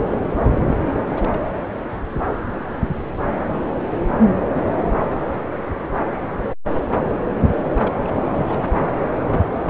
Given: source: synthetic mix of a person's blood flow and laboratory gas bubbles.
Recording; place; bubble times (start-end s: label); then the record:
Doppler ultrasound of blood flow; subclavian vein
0.71-1.39 s: bubbles
7.58-7.68 s: bubbles
7.75-7.96 s: bubbles
8.04-8.22 s: bubbles
8.32-8.96 s: bubbles
From the record:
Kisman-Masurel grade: 221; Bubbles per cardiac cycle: several, 3 to 8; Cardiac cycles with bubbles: 10 to 50%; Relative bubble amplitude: barely perceptible (0.100 to 0.250); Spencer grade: 2 (many but less than half of the cardiac periods contain bubble signals, singularly or in groups); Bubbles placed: anywhere in the cardiac cycle